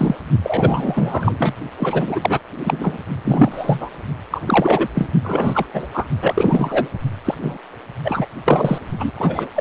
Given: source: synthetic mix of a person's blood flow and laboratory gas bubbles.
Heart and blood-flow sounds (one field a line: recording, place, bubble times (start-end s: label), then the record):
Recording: Doppler ultrasound of blood flow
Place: precordium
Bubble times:
0.00-0.15 s: bubbles
0.43-1.55 s: bubbles
1.79-2.40 s: bubbles
2.58-2.98 s: bubbles
3.24-3.90 s: bubbles
4.30-4.40 s: bubbles
4.46-4.88 s: bubbles
4.95-5.10 s: bubbles
5.23-5.66 s: bubbles
5.73-5.87 s: bubbles
5.94-6.06 s: bubbles
6.19-6.88 s: bubbles
7.25-7.35 s: bubbles
7.42-7.58 s: bubbles
8.04-8.26 s: bubbles
8.45-8.78 s: bubbles
8.99-9.12 s: bubbles
9.17-9.47 s: bubbles
9.54-9.61 s: bubbles
From the record:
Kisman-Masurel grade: 343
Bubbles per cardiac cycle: rolling drumbeat, 9 or more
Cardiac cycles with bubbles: 100%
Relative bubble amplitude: loud (0.450 to 0.775)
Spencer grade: 3 (all of the cardiac periods contain showers or single bubble signals, but not dominating or overriding the cardiac motion signals)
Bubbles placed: only in the low amplitude regions of the cardiac cycle